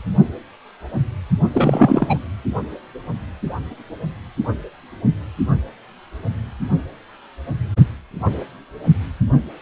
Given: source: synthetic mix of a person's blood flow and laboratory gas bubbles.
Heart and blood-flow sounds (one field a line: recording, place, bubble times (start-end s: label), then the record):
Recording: Doppler ultrasound of blood flow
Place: precordium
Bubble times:
1.54-2.18 s: bubbles
From the record:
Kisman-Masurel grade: 213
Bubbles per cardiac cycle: several, 3 to 8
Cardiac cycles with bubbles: 1 to 10%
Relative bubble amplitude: loud (0.450 to 0.775)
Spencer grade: 1 (occasional bubble signal discernible with the cardiac motion signal, with majority of cardiac periods free of bubbles)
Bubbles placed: only in the low amplitude regions of the cardiac cycle